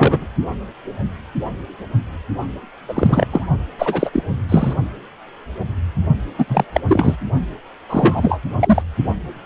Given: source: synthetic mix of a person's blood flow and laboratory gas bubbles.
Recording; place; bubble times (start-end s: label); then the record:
Doppler ultrasound of blood flow; precordium
0.00-0.27 s: bubbles
2.88-3.27 s: bubbles
3.31-3.47 s: bubbles
3.79-4.10 s: bubbles
4.12-4.22 s: bubbles
4.49-4.74 s: bubbles
6.38-6.64 s: bubbles
6.72-6.80 s: bubbles
6.88-7.17 s: bubbles
7.89-8.40 s: bubbles
8.60-8.82 s: bubbles
From the record:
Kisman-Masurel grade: 233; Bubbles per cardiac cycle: several, 3 to 8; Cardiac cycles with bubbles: 50 to 99%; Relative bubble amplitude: loud (0.450 to 0.775); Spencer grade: 3 (all of the cardiac periods contain showers or single bubble signals, but not dominating or overriding the cardiac motion signals); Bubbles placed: only in the low amplitude regions of the cardiac cycle